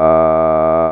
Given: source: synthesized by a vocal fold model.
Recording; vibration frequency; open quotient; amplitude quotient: sustained vowel; 80 Hz; 0.2; 1.2